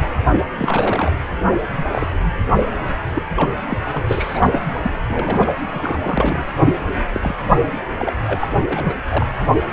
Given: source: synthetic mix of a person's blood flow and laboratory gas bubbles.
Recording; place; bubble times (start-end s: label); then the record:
Doppler ultrasound of blood flow; precordium
0.58-1.12 s: bubbles
1.73-2.08 s: bubbles
2.60-2.65 s: bubbles
3.15-3.22 s: bubbles
3.36-3.56 s: bubbles
3.69-3.78 s: bubbles
3.81-4.03 s: bubbles
4.08-4.74 s: bubbles
4.84-5.53 s: bubbles
5.74-6.44 s: bubbles
7.12-7.36 s: bubbles
7.99-8.13 s: bubbles
8.26-8.47 s: bubbles
8.71-8.96 s: bubbles
9.11-9.26 s: bubbles
9.40-9.46 s: bubbles
From the record:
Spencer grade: 3 (all of the cardiac periods contain showers or single bubble signals, but not dominating or overriding the cardiac motion signals); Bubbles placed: anywhere in the cardiac cycle